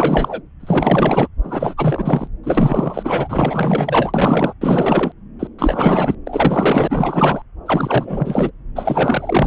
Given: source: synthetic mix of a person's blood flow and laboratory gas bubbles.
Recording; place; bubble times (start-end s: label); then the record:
Doppler ultrasound of blood flow; subclavian vein
0.00-0.41 s: bubbles
0.59-1.28 s: bubbles
1.43-1.74 s: bubbles
1.77-2.28 s: bubbles
2.43-4.54 s: bubbles
4.61-5.12 s: bubbles
5.39-5.48 s: bubbles
5.58-6.15 s: bubbles
6.27-7.42 s: bubbles
7.66-8.51 s: bubbles
8.75-9.47 s: bubbles
From the record:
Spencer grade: 4 (maximum detectable bubble signal sounding continuously throughout systole and diastole of every cardiac period, and overriding the amplitude of the normal cardiac signals); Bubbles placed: anywhere in the cardiac cycle